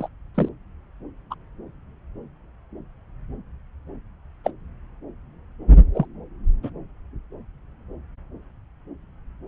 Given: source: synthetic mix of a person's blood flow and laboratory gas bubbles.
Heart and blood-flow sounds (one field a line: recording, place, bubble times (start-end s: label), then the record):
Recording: Doppler ultrasound of blood flow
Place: subclavian vein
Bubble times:
0.00-0.08 s: bubbles
0.36-0.49 s: bubbles
1.31-1.34 s: bubbles
4.45-4.51 s: bubbles
5.94-6.05 s: bubbles
6.63-6.70 s: bubbles
From the record:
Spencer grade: 2 (many but less than half of the cardiac periods contain bubble signals, singularly or in groups)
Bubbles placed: anywhere in the cardiac cycle